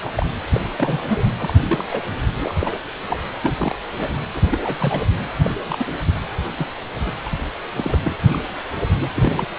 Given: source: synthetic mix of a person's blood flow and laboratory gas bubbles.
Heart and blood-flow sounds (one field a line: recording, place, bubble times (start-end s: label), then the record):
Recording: Doppler ultrasound of blood flow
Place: precordium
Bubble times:
0.03-0.12 s: bubbles
0.15-0.28 s: bubbles
0.53-0.60 s: bubbles
0.77-1.23 s: bubbles
1.39-1.53 s: bubbles
1.68-1.85 s: bubbles
1.91-2.01 s: bubbles
2.40-2.54 s: bubbles
2.59-2.77 s: bubbles
3.09-3.20 s: bubbles
3.42-3.52 s: bubbles
3.58-3.75 s: bubbles
3.97-4.21 s: bubbles
4.34-4.40 s: bubbles
4.49-5.02 s: bubbles
5.42-5.50 s: bubbles
5.68-5.85 s: bubbles
6.07-6.12 s: bubbles
6.57-6.67 s: bubbles
6.94-7.12 s: bubbles
7.25-7.29 s: bubbles
7.77-7.96 s: bubbles
8.03-8.16 s: bubbles
8.29-8.40 s: bubbles
9.00-9.07 s: bubbles
9.14-9.47 s: bubbles
From the record:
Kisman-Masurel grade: 242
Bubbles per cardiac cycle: several, 3 to 8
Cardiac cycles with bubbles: 100%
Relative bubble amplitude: moderate (0.250 to 0.450)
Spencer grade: 3 (all of the cardiac periods contain showers or single bubble signals, but not dominating or overriding the cardiac motion signals)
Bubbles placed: anywhere in the cardiac cycle